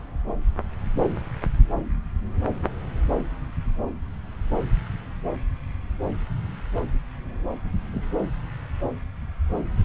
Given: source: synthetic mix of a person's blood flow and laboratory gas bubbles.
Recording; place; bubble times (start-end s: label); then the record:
Doppler ultrasound of blood flow; subclavian vein
7.92-8.12 s: bubbles
From the record:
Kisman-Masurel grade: 111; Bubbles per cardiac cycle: 1 to 2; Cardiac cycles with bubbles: 1 to 10%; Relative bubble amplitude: barely perceptible (0.100 to 0.250); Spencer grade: 1 (occasional bubble signal discernible with the cardiac motion signal, with majority of cardiac periods free of bubbles); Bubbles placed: anywhere in the cardiac cycle